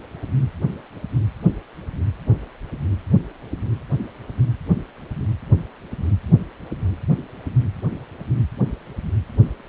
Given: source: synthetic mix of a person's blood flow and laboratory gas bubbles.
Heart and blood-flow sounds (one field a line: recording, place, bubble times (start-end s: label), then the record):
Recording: Doppler ultrasound of blood flow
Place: precordium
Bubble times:
no bubbles
From the record:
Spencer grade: 0 (complete lack of bubble signals)